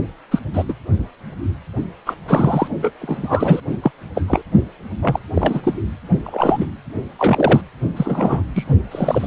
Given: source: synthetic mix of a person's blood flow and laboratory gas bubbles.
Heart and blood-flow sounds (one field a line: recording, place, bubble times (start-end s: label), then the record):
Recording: Doppler ultrasound of blood flow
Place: precordium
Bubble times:
0.31-0.39 s: bubbles
0.53-0.64 s: bubbles
0.68-0.74 s: bubbles
2.06-2.14 s: bubbles
2.27-2.68 s: bubbles
2.82-2.92 s: bubbles
3.01-3.60 s: bubbles
3.82-3.91 s: bubbles
4.15-4.22 s: bubbles
4.28-4.41 s: bubbles
5.02-5.20 s: bubbles
5.34-5.61 s: bubbles
5.63-5.74 s: bubbles
6.23-6.66 s: bubbles
7.19-7.61 s: bubbles
7.96-8.42 s: bubbles
8.55-8.64 s: bubbles
8.91-9.27 s: bubbles
From the record:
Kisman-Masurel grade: 233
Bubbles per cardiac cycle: several, 3 to 8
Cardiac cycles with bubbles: 50 to 99%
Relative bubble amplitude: loud (0.450 to 0.775)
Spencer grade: 3 (all of the cardiac periods contain showers or single bubble signals, but not dominating or overriding the cardiac motion signals)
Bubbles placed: only in the low amplitude regions of the cardiac cycle